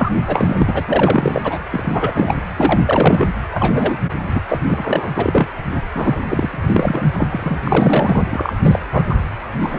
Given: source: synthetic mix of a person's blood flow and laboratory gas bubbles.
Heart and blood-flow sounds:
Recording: Doppler ultrasound of blood flow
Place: precordium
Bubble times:
0.00-0.11 s: bubbles
0.27-1.59 s: bubbles
1.71-2.35 s: bubbles
2.56-3.28 s: bubbles
3.51-3.98 s: bubbles
4.22-4.41 s: bubbles
4.48-4.59 s: bubbles
4.67-5.10 s: bubbles
5.16-5.48 s: bubbles
5.94-6.19 s: bubbles
6.29-7.08 s: bubbles
7.13-7.25 s: bubbles
7.29-7.58 s: bubbles
7.63-8.24 s: bubbles
8.30-8.54 s: bubbles
8.63-8.79 s: bubbles
8.92-9.05 s: bubbles
9.09-9.15 s: bubbles
9.61-9.79 s: bubbles
From the record:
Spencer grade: 3 (all of the cardiac periods contain showers or single bubble signals, but not dominating or overriding the cardiac motion signals)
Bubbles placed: anywhere in the cardiac cycle

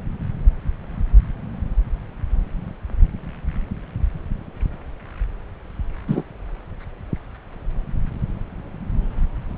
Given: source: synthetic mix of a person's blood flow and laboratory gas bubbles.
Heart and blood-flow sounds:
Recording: Doppler ultrasound of blood flow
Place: subclavian vein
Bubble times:
6.08-6.24 s: bubbles
From the record:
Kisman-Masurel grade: 113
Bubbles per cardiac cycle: 1 to 2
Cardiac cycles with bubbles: 1 to 10%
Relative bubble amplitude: loud (0.450 to 0.775)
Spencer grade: 1 (occasional bubble signal discernible with the cardiac motion signal, with majority of cardiac periods free of bubbles)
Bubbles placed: anywhere in the cardiac cycle

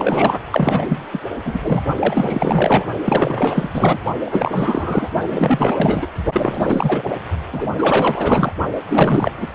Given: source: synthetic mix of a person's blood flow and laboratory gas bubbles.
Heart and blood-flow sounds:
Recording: Doppler ultrasound of blood flow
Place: precordium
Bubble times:
0.00-0.39 s: bubbles
0.51-1.08 s: bubbles
1.12-1.21 s: bubbles
1.44-1.59 s: bubbles
1.62-1.81 s: bubbles
1.97-2.86 s: bubbles
3.04-3.69 s: bubbles
3.73-4.00 s: bubbles
4.26-5.10 s: bubbles
5.30-6.07 s: bubbles
6.32-7.02 s: bubbles
7.51-8.54 s: bubbles
8.89-9.31 s: bubbles
9.38-9.47 s: bubbles
From the record:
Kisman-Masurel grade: 444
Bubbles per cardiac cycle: continuous sound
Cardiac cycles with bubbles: 100%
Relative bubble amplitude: maximal (0.775 to 0.999)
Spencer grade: 4 (maximum detectable bubble signal sounding continuously throughout systole and diastole of every cardiac period, and overriding the amplitude of the normal cardiac signals)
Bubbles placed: only in the low amplitude regions of the cardiac cycle

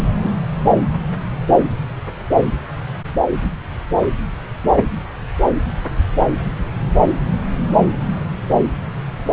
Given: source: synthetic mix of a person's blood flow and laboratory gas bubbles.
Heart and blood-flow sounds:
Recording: Doppler ultrasound of blood flow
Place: subclavian vein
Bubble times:
0.20-0.30 s: bubbles
From the record:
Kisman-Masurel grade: 112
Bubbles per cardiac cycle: 1 to 2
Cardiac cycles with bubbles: 1 to 10%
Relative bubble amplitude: moderate (0.250 to 0.450)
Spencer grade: 1 (occasional bubble signal discernible with the cardiac motion signal, with majority of cardiac periods free of bubbles)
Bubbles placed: anywhere in the cardiac cycle

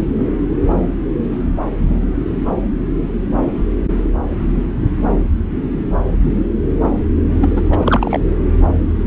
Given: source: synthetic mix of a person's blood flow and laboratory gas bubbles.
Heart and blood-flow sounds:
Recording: Doppler ultrasound of blood flow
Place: subclavian vein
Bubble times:
7.41-7.50 s: bubbles
7.56-7.62 s: bubbles
7.72-7.76 s: bubbles
7.79-8.19 s: bubbles
From the record:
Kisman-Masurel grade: 213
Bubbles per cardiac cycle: several, 3 to 8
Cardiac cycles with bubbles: 1 to 10%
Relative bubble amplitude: loud (0.450 to 0.775)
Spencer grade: 1 (occasional bubble signal discernible with the cardiac motion signal, with majority of cardiac periods free of bubbles)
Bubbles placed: anywhere in the cardiac cycle

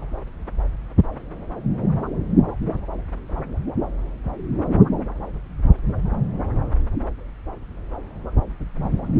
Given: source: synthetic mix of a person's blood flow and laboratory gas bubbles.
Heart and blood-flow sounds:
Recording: Doppler ultrasound of blood flow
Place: subclavian vein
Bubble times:
no bubbles
From the record:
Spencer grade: 0 (complete lack of bubble signals)

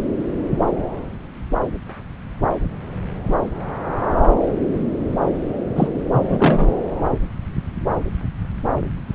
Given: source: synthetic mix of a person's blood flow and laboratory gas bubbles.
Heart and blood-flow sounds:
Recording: Doppler ultrasound of blood flow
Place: subclavian vein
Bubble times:
5.75-5.90 s: bubbles
6.12-6.69 s: bubbles
From the record:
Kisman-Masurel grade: 123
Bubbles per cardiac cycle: 1 to 2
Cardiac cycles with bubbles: 10 to 50%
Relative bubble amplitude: loud (0.450 to 0.775)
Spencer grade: 2 (many but less than half of the cardiac periods contain bubble signals, singularly or in groups)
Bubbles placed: anywhere in the cardiac cycle

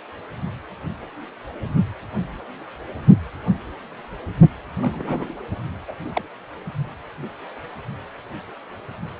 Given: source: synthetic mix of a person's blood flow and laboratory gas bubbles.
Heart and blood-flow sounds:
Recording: Doppler ultrasound of blood flow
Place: precordium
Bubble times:
4.81-5.34 s: bubbles
5.88-5.94 s: bubbles
6.13-6.22 s: bubbles
From the record:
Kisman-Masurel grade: 121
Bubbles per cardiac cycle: 1 to 2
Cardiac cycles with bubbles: 10 to 50%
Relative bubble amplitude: barely perceptible (0.100 to 0.250)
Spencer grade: 2 (many but less than half of the cardiac periods contain bubble signals, singularly or in groups)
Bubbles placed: anywhere in the cardiac cycle

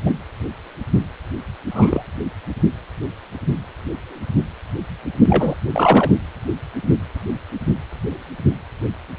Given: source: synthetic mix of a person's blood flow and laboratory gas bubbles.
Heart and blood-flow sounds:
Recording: Doppler ultrasound of blood flow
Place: precordium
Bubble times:
0.00-0.03 s: bubbles
0.06-0.15 s: bubbles
1.70-2.03 s: bubbles
5.28-5.55 s: bubbles
5.70-6.12 s: bubbles
From the record:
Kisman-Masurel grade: 233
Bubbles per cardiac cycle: several, 3 to 8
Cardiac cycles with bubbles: 50 to 99%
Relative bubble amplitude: loud (0.450 to 0.775)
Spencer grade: 3 (all of the cardiac periods contain showers or single bubble signals, but not dominating or overriding the cardiac motion signals)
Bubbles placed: anywhere in the cardiac cycle

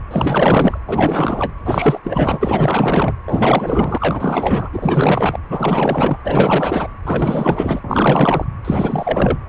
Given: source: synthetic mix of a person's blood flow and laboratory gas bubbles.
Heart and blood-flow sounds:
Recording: Doppler ultrasound of blood flow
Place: precordium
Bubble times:
0.10-0.78 s: bubbles
0.87-1.53 s: bubbles
1.65-2.00 s: bubbles
2.04-3.13 s: bubbles
3.26-4.69 s: bubbles
4.73-5.40 s: bubbles
5.49-6.17 s: bubbles
6.24-6.88 s: bubbles
7.05-7.80 s: bubbles
7.84-8.46 s: bubbles
8.64-9.38 s: bubbles
From the record:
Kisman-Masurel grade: 444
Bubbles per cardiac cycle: continuous sound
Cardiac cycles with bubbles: 100%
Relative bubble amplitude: maximal (0.775 to 0.999)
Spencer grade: 4 (maximum detectable bubble signal sounding continuously throughout systole and diastole of every cardiac period, and overriding the amplitude of the normal cardiac signals)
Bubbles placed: anywhere in the cardiac cycle

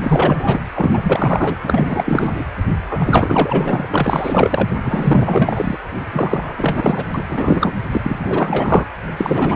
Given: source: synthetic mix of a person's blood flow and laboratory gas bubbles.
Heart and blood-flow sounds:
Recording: Doppler ultrasound of blood flow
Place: precordium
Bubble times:
0.01-0.59 s: bubbles
0.75-1.55 s: bubbles
1.62-2.44 s: bubbles
2.89-3.86 s: bubbles
3.90-4.70 s: bubbles
4.84-5.78 s: bubbles
6.12-7.05 s: bubbles
7.14-7.23 s: bubbles
7.29-7.75 s: bubbles
7.92-8.85 s: bubbles
9.17-9.55 s: bubbles
From the record:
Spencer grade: 4 (maximum detectable bubble signal sounding continuously throughout systole and diastole of every cardiac period, and overriding the amplitude of the normal cardiac signals)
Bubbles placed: anywhere in the cardiac cycle

